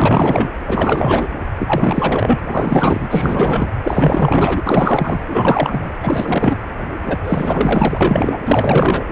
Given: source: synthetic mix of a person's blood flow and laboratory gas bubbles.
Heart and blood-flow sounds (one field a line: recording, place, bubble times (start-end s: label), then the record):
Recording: Doppler ultrasound of blood flow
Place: precordium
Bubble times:
0.00-0.49 s: bubbles
0.67-1.30 s: bubbles
1.59-2.39 s: bubbles
2.47-3.72 s: bubbles
3.83-4.62 s: bubbles
4.66-5.22 s: bubbles
5.27-5.91 s: bubbles
6.02-6.57 s: bubbles
7.01-7.18 s: bubbles
7.23-8.38 s: bubbles
8.46-9.02 s: bubbles
From the record:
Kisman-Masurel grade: 444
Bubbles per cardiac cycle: continuous sound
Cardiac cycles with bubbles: 100%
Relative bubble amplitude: maximal (0.775 to 0.999)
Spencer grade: 4 (maximum detectable bubble signal sounding continuously throughout systole and diastole of every cardiac period, and overriding the amplitude of the normal cardiac signals)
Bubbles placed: anywhere in the cardiac cycle